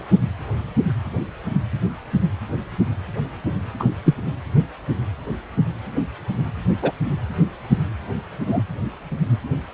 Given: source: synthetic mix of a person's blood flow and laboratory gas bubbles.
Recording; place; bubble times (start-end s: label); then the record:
Doppler ultrasound of blood flow; precordium
3.79-3.85 s: bubbles
4.04-4.14 s: bubbles
6.82-6.92 s: bubbles
8.47-8.62 s: bubbles
From the record:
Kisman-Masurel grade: 123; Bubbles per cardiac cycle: 1 to 2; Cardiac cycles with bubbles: 10 to 50%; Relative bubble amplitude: loud (0.450 to 0.775); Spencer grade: 2 (many but less than half of the cardiac periods contain bubble signals, singularly or in groups); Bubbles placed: anywhere in the cardiac cycle